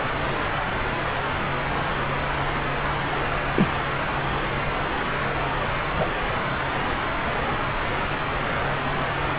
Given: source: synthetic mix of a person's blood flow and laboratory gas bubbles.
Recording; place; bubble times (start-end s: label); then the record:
Doppler ultrasound of blood flow; subclavian vein
3.54-3.70 s: bubbles
5.96-6.06 s: bubbles
From the record:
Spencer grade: 2 (many but less than half of the cardiac periods contain bubble signals, singularly or in groups); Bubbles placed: anywhere in the cardiac cycle